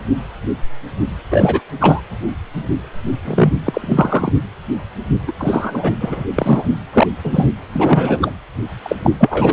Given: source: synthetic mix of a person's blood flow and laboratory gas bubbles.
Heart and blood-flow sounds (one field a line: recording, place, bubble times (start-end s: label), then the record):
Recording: Doppler ultrasound of blood flow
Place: precordium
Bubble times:
1.31-1.61 s: bubbles
1.80-2.01 s: bubbles
3.25-3.53 s: bubbles
3.65-4.32 s: bubbles
5.27-5.32 s: bubbles
5.38-5.92 s: bubbles
5.99-6.25 s: bubbles
6.35-6.68 s: bubbles
6.93-7.07 s: bubbles
7.23-7.47 s: bubbles
7.73-8.32 s: bubbles
8.83-8.96 s: bubbles
9.04-9.11 s: bubbles
9.19-9.53 s: bubbles
From the record:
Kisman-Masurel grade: 333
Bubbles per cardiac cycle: rolling drumbeat, 9 or more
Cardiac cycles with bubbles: 50 to 99%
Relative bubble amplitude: loud (0.450 to 0.775)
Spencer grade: 3 (all of the cardiac periods contain showers or single bubble signals, but not dominating or overriding the cardiac motion signals)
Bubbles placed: anywhere in the cardiac cycle